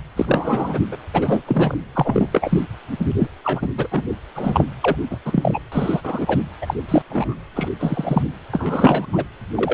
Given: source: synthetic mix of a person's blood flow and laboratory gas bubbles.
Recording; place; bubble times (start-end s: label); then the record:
Doppler ultrasound of blood flow; precordium
0.16-0.79 s: bubbles
0.92-0.96 s: bubbles
1.13-1.42 s: bubbles
1.46-1.79 s: bubbles
1.94-2.27 s: bubbles
2.32-2.63 s: bubbles
2.99-3.07 s: bubbles
3.18-3.27 s: bubbles
3.44-3.69 s: bubbles
3.77-3.88 s: bubbles
3.90-4.05 s: bubbles
4.35-4.66 s: bubbles
4.82-4.96 s: bubbles
5.10-5.17 s: bubbles
5.25-5.59 s: bubbles
5.71-6.38 s: bubbles
6.61-6.74 s: bubbles
6.88-7.02 s: bubbles
7.09-7.35 s: bubbles
7.55-7.68 s: bubbles
7.79-8.23 s: bubbles
8.52-9.06 s: bubbles
9.12-9.24 s: bubbles
9.55-9.74 s: bubbles
From the record:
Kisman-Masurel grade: 243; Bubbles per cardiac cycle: several, 3 to 8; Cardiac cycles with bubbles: 100%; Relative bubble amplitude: loud (0.450 to 0.775); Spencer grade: 3 (all of the cardiac periods contain showers or single bubble signals, but not dominating or overriding the cardiac motion signals); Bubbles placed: anywhere in the cardiac cycle